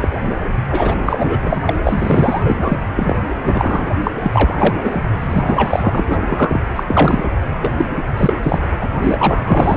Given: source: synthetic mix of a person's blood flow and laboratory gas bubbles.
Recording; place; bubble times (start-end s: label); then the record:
Doppler ultrasound of blood flow; precordium
0.00-0.09 s: bubbles
0.72-0.96 s: bubbles
1.05-1.60 s: bubbles
1.65-1.72 s: bubbles
1.83-2.83 s: bubbles
2.96-3.17 s: bubbles
3.44-3.98 s: bubbles
4.03-4.11 s: bubbles
4.20-5.02 s: bubbles
5.20-6.60 s: bubbles
6.75-6.83 s: bubbles
6.88-7.29 s: bubbles
7.61-7.73 s: bubbles
7.77-7.85 s: bubbles
8.17-8.33 s: bubbles
8.42-8.58 s: bubbles
8.62-8.67 s: bubbles
8.81-8.87 s: bubbles
9.03-9.77 s: bubbles
From the record:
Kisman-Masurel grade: 343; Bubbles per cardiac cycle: rolling drumbeat, 9 or more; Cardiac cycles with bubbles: 100%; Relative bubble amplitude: loud (0.450 to 0.775); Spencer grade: 3 (all of the cardiac periods contain showers or single bubble signals, but not dominating or overriding the cardiac motion signals); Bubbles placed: anywhere in the cardiac cycle